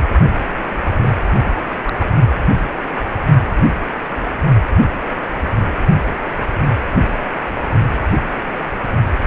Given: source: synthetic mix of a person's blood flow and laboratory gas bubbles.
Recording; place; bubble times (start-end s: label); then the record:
Doppler ultrasound of blood flow; precordium
1.01-1.09 s: bubbles
1.35-1.52 s: bubbles
1.84-2.09 s: bubbles
From the record:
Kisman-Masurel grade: 211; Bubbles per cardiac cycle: several, 3 to 8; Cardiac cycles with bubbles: 1 to 10%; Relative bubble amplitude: barely perceptible (0.100 to 0.250); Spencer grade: 1 (occasional bubble signal discernible with the cardiac motion signal, with majority of cardiac periods free of bubbles); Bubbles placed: only in the low amplitude regions of the cardiac cycle